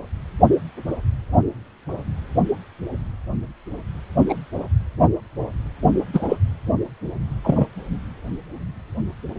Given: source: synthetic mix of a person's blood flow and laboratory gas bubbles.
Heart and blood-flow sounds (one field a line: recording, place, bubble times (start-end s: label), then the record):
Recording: Doppler ultrasound of blood flow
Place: precordium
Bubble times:
4.29-4.34 s: bubbles
6.13-6.37 s: bubbles
7.44-7.67 s: bubbles
From the record:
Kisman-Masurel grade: 123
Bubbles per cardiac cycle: 1 to 2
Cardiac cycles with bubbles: 10 to 50%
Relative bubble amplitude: loud (0.450 to 0.775)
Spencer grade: 2 (many but less than half of the cardiac periods contain bubble signals, singularly or in groups)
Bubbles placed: anywhere in the cardiac cycle